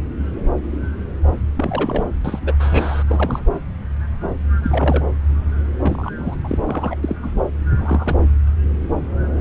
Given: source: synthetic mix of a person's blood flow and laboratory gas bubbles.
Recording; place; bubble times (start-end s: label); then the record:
Doppler ultrasound of blood flow; subclavian vein
1.57-2.03 s: bubbles
2.25-2.54 s: bubbles
2.59-3.03 s: bubbles
3.07-3.42 s: bubbles
4.62-5.04 s: bubbles
5.81-6.10 s: bubbles
6.17-6.35 s: bubbles
6.44-6.58 s: bubbles
6.67-6.96 s: bubbles
7.03-7.16 s: bubbles
7.23-7.29 s: bubbles
7.76-8.17 s: bubbles
From the record:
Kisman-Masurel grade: 222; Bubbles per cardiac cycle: several, 3 to 8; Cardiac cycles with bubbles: 10 to 50%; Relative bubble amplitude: moderate (0.250 to 0.450); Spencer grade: 2 (many but less than half of the cardiac periods contain bubble signals, singularly or in groups); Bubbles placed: anywhere in the cardiac cycle